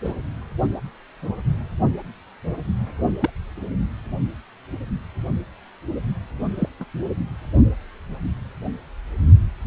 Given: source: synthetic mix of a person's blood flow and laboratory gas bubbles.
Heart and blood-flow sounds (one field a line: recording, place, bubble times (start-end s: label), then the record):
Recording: Doppler ultrasound of blood flow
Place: precordium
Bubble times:
0.04-0.12 s: bubbles
3.19-3.30 s: bubbles
6.58-6.69 s: bubbles
6.79-6.84 s: bubbles
From the record:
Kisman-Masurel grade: 122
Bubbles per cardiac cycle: 1 to 2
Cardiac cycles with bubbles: 10 to 50%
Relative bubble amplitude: moderate (0.250 to 0.450)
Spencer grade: 2 (many but less than half of the cardiac periods contain bubble signals, singularly or in groups)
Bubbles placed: only in the low amplitude regions of the cardiac cycle